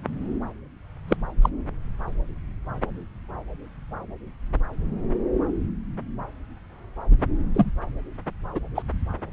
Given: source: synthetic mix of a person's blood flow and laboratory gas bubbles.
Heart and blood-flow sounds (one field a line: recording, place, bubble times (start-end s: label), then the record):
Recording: Doppler ultrasound of blood flow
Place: subclavian vein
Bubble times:
1.08-1.17 s: bubbles
1.42-1.50 s: bubbles
7.54-7.72 s: bubbles
8.54-8.60 s: bubbles
8.75-8.83 s: bubbles
From the record:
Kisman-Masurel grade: 122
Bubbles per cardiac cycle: 1 to 2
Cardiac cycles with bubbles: 10 to 50%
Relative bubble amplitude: moderate (0.250 to 0.450)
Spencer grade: 2 (many but less than half of the cardiac periods contain bubble signals, singularly or in groups)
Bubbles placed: anywhere in the cardiac cycle